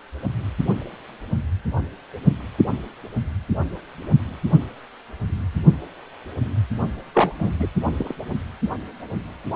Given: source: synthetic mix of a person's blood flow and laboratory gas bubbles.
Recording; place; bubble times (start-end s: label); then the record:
Doppler ultrasound of blood flow; precordium
7.13-7.33 s: bubbles
7.38-7.50 s: bubbles
7.59-7.68 s: bubbles
7.86-7.92 s: bubbles
7.97-8.14 s: bubbles
From the record:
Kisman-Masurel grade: 222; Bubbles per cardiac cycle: several, 3 to 8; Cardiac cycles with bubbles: 10 to 50%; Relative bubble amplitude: moderate (0.250 to 0.450); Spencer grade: 2 (many but less than half of the cardiac periods contain bubble signals, singularly or in groups); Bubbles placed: only in the low amplitude regions of the cardiac cycle